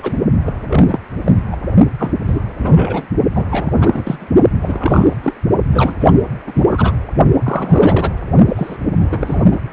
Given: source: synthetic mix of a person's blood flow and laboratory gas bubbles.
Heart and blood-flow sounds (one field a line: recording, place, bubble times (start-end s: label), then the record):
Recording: Doppler ultrasound of blood flow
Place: precordium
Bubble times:
0.00-0.20 s: bubbles
0.46-0.99 s: bubbles
1.25-1.32 s: bubbles
1.36-1.42 s: bubbles
1.51-1.56 s: bubbles
1.98-2.12 s: bubbles
2.25-2.44 s: bubbles
2.58-3.07 s: bubbles
3.35-3.47 s: bubbles
3.50-4.28 s: bubbles
4.62-5.14 s: bubbles
5.24-5.34 s: bubbles
5.71-5.95 s: bubbles
6.00-6.13 s: bubbles
6.46-6.52 s: bubbles
6.54-6.93 s: bubbles
7.43-8.13 s: bubbles
8.48-8.77 s: bubbles
8.95-9.46 s: bubbles
9.51-9.60 s: bubbles
From the record:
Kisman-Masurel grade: 343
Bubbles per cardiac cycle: rolling drumbeat, 9 or more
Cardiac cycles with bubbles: 100%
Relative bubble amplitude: loud (0.450 to 0.775)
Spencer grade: 3 (all of the cardiac periods contain showers or single bubble signals, but not dominating or overriding the cardiac motion signals)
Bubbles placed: only in the low amplitude regions of the cardiac cycle